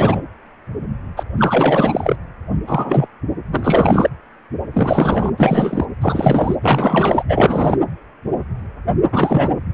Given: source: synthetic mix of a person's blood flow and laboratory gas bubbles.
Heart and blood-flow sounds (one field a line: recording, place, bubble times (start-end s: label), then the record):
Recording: Doppler ultrasound of blood flow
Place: precordium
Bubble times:
0.00-0.21 s: bubbles
1.17-1.24 s: bubbles
1.37-2.16 s: bubbles
2.67-3.08 s: bubbles
3.50-4.09 s: bubbles
4.73-5.30 s: bubbles
5.38-5.85 s: bubbles
6.01-6.55 s: bubbles
6.62-7.23 s: bubbles
7.28-7.76 s: bubbles
9.12-9.54 s: bubbles
From the record:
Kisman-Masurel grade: 333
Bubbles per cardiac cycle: rolling drumbeat, 9 or more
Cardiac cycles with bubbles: 50 to 99%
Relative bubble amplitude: loud (0.450 to 0.775)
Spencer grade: 3 (all of the cardiac periods contain showers or single bubble signals, but not dominating or overriding the cardiac motion signals)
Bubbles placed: anywhere in the cardiac cycle